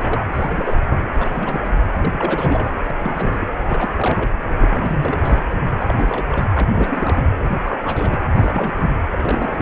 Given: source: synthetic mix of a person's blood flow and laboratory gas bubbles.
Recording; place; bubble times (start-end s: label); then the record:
Doppler ultrasound of blood flow; precordium
0.00-0.23 s: bubbles
0.32-0.82 s: bubbles
0.85-1.01 s: bubbles
1.20-1.74 s: bubbles
1.96-2.71 s: bubbles
2.90-3.48 s: bubbles
3.63-3.92 s: bubbles
3.94-4.32 s: bubbles
4.61-5.44 s: bubbles
5.79-6.48 s: bubbles
6.54-6.68 s: bubbles
6.75-7.22 s: bubbles
7.44-7.58 s: bubbles
7.64-7.80 s: bubbles
7.83-8.21 s: bubbles
8.36-9.02 s: bubbles
9.11-9.62 s: bubbles
From the record:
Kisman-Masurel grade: 342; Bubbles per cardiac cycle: rolling drumbeat, 9 or more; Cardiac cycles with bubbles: 100%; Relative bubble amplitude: moderate (0.250 to 0.450); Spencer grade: 3 (all of the cardiac periods contain showers or single bubble signals, but not dominating or overriding the cardiac motion signals); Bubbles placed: anywhere in the cardiac cycle